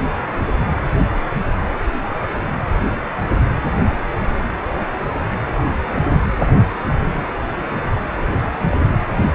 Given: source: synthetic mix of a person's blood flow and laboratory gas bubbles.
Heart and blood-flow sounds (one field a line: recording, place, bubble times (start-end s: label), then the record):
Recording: Doppler ultrasound of blood flow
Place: precordium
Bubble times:
8.43-8.52 s: bubbles
8.70-8.78 s: bubbles
From the record:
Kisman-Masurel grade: 111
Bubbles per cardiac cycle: 1 to 2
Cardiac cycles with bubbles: 1 to 10%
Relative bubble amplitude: barely perceptible (0.100 to 0.250)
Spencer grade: 1 (occasional bubble signal discernible with the cardiac motion signal, with majority of cardiac periods free of bubbles)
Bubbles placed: anywhere in the cardiac cycle